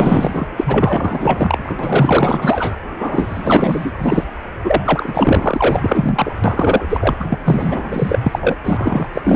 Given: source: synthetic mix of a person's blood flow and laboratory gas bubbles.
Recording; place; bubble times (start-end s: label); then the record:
Doppler ultrasound of blood flow; precordium
0.00-0.47 s: bubbles
0.56-1.77 s: bubbles
1.79-2.77 s: bubbles
2.98-3.92 s: bubbles
3.98-4.25 s: bubbles
4.64-6.33 s: bubbles
6.44-6.87 s: bubbles
6.89-7.17 s: bubbles
7.19-7.38 s: bubbles
7.44-8.20 s: bubbles
8.22-8.56 s: bubbles
8.63-9.09 s: bubbles
9.12-9.36 s: bubbles
From the record:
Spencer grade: 4 (maximum detectable bubble signal sounding continuously throughout systole and diastole of every cardiac period, and overriding the amplitude of the normal cardiac signals); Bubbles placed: anywhere in the cardiac cycle